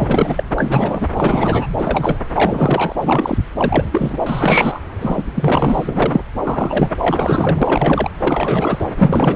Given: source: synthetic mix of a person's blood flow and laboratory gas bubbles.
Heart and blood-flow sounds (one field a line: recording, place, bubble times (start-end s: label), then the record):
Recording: Doppler ultrasound of blood flow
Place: subclavian vein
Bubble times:
0.00-0.43 s: bubbles
0.56-1.08 s: bubbles
1.15-1.67 s: bubbles
1.78-2.17 s: bubbles
2.35-2.93 s: bubbles
3.01-3.38 s: bubbles
3.57-4.19 s: bubbles
4.26-4.80 s: bubbles
5.00-5.23 s: bubbles
5.35-6.23 s: bubbles
6.44-6.95 s: bubbles
7.01-8.10 s: bubbles
8.20-8.85 s: bubbles
8.96-9.36 s: bubbles
From the record:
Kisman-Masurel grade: 343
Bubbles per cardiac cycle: rolling drumbeat, 9 or more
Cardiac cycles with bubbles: 100%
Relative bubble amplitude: loud (0.450 to 0.775)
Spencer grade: 3 (all of the cardiac periods contain showers or single bubble signals, but not dominating or overriding the cardiac motion signals)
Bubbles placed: anywhere in the cardiac cycle